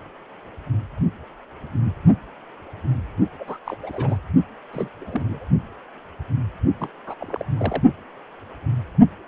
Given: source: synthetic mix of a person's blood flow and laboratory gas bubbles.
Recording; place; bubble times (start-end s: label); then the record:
Doppler ultrasound of blood flow; precordium
3.40-3.44 s: bubbles
3.46-3.57 s: bubbles
3.66-3.77 s: bubbles
3.82-4.17 s: bubbles
4.72-4.88 s: bubbles
5.00-5.45 s: bubbles
6.79-6.88 s: bubbles
7.06-7.14 s: bubbles
7.20-7.44 s: bubbles
7.57-7.82 s: bubbles
From the record:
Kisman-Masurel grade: 221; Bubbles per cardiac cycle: several, 3 to 8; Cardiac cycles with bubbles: 10 to 50%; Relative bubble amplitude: barely perceptible (0.100 to 0.250); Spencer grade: 2 (many but less than half of the cardiac periods contain bubble signals, singularly or in groups); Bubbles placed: only in the low amplitude regions of the cardiac cycle